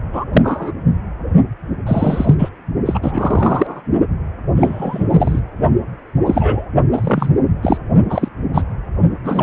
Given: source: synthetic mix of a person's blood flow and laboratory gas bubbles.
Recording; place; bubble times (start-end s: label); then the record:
Doppler ultrasound of blood flow; precordium
0.12-0.24 s: bubbles
0.33-0.72 s: bubbles
1.86-2.35 s: bubbles
2.38-2.49 s: bubbles
2.85-3.00 s: bubbles
3.03-3.81 s: bubbles
4.56-5.07 s: bubbles
5.10-5.39 s: bubbles
6.25-6.66 s: bubbles
6.91-7.30 s: bubbles
7.62-7.78 s: bubbles
8.10-8.29 s: bubbles
8.54-8.62 s: bubbles
9.24-9.43 s: bubbles
From the record:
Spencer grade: 3 (all of the cardiac periods contain showers or single bubble signals, but not dominating or overriding the cardiac motion signals); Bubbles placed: only in the low amplitude regions of the cardiac cycle